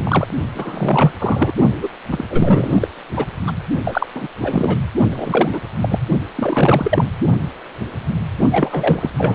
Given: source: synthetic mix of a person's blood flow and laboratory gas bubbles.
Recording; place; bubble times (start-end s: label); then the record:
Doppler ultrasound of blood flow; precordium
0.00-0.28 s: bubbles
0.54-1.12 s: bubbles
1.19-1.52 s: bubbles
1.82-1.89 s: bubbles
2.10-2.24 s: bubbles
2.30-2.88 s: bubbles
3.16-3.25 s: bubbles
3.46-3.53 s: bubbles
3.85-4.06 s: bubbles
4.14-4.27 s: bubbles
4.40-4.78 s: bubbles
5.10-5.60 s: bubbles
5.81-5.99 s: bubbles
6.35-7.04 s: bubbles
8.51-9.10 s: bubbles
9.17-9.35 s: bubbles
From the record:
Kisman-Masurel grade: 333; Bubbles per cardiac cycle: rolling drumbeat, 9 or more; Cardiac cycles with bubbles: 50 to 99%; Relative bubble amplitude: loud (0.450 to 0.775); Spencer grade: 3 (all of the cardiac periods contain showers or single bubble signals, but not dominating or overriding the cardiac motion signals); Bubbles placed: only in the low amplitude regions of the cardiac cycle